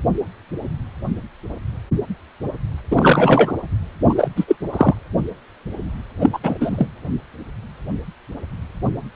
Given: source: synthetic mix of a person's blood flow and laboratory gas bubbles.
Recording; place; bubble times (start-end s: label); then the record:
Doppler ultrasound of blood flow; precordium
2.91-3.55 s: bubbles
4.09-4.28 s: bubbles
4.36-4.45 s: bubbles
4.48-4.56 s: bubbles
4.72-4.95 s: bubbles
6.21-6.31 s: bubbles
6.33-6.39 s: bubbles
6.43-6.58 s: bubbles
6.61-6.87 s: bubbles
From the record:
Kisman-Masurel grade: 223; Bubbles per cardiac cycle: several, 3 to 8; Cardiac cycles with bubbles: 10 to 50%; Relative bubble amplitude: loud (0.450 to 0.775); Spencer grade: 2 (many but less than half of the cardiac periods contain bubble signals, singularly or in groups); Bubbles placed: anywhere in the cardiac cycle